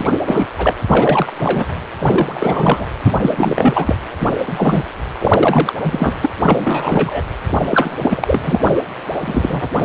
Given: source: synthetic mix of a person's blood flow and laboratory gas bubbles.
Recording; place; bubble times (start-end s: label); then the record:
Doppler ultrasound of blood flow; precordium
0.00-0.18 s: bubbles
0.27-0.46 s: bubbles
0.57-0.74 s: bubbles
0.88-1.33 s: bubbles
1.40-1.66 s: bubbles
1.99-2.87 s: bubbles
3.05-3.12 s: bubbles
3.19-3.96 s: bubbles
4.19-4.36 s: bubbles
4.46-4.83 s: bubbles
5.20-5.73 s: bubbles
5.83-6.14 s: bubbles
6.21-6.30 s: bubbles
6.42-7.24 s: bubbles
7.62-8.80 s: bubbles
9.18-9.68 s: bubbles
9.73-9.85 s: bubbles
From the record:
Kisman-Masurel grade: 343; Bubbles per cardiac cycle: rolling drumbeat, 9 or more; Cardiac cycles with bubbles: 100%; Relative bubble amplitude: loud (0.450 to 0.775); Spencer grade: 3 (all of the cardiac periods contain showers or single bubble signals, but not dominating or overriding the cardiac motion signals); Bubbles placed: anywhere in the cardiac cycle